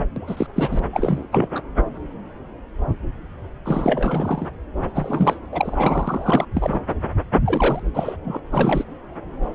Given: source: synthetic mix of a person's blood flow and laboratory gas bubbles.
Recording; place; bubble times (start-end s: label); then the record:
Doppler ultrasound of blood flow; subclavian vein
0.00-0.05 s: bubbles
0.16-0.47 s: bubbles
0.55-0.79 s: bubbles
0.93-1.27 s: bubbles
1.32-1.47 s: bubbles
1.55-1.60 s: bubbles
3.65-4.48 s: bubbles
4.95-5.37 s: bubbles
5.52-6.45 s: bubbles
6.54-6.82 s: bubbles
7.46-7.79 s: bubbles
7.94-8.16 s: bubbles
8.24-8.39 s: bubbles
8.51-8.84 s: bubbles
From the record:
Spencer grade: 3 (all of the cardiac periods contain showers or single bubble signals, but not dominating or overriding the cardiac motion signals); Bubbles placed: anywhere in the cardiac cycle